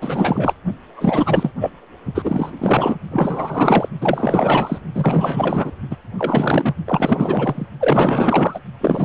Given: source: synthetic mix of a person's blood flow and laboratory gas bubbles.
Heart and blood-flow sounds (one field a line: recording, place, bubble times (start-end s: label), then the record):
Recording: Doppler ultrasound of blood flow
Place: precordium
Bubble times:
0.02-0.53 s: bubbles
0.96-1.52 s: bubbles
1.60-1.71 s: bubbles
2.15-2.51 s: bubbles
2.58-2.97 s: bubbles
3.10-3.89 s: bubbles
4.01-4.79 s: bubbles
4.95-5.71 s: bubbles
5.90-5.96 s: bubbles
6.18-6.75 s: bubbles
6.86-7.67 s: bubbles
7.80-8.59 s: bubbles
8.80-9.05 s: bubbles
From the record:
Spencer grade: 4 (maximum detectable bubble signal sounding continuously throughout systole and diastole of every cardiac period, and overriding the amplitude of the normal cardiac signals)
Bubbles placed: only in the low amplitude regions of the cardiac cycle